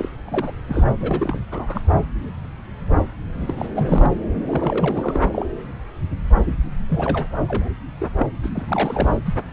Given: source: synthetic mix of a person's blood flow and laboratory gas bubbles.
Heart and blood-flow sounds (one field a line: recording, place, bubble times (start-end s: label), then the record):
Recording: Doppler ultrasound of blood flow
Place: subclavian vein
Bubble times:
0.00-0.09 s: bubbles
0.24-0.54 s: bubbles
0.69-0.84 s: bubbles
1.00-1.41 s: bubbles
1.51-1.80 s: bubbles
3.34-3.55 s: bubbles
3.58-3.69 s: bubbles
3.75-4.11 s: bubbles
4.35-5.47 s: bubbles
6.89-7.27 s: bubbles
7.48-7.68 s: bubbles
8.00-8.08 s: bubbles
8.19-8.26 s: bubbles
8.43-8.50 s: bubbles
8.54-9.19 s: bubbles
9.25-9.35 s: bubbles
From the record:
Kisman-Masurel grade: 332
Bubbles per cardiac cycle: rolling drumbeat, 9 or more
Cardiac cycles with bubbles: 50 to 99%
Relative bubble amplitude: moderate (0.250 to 0.450)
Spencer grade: 3 (all of the cardiac periods contain showers or single bubble signals, but not dominating or overriding the cardiac motion signals)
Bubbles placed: anywhere in the cardiac cycle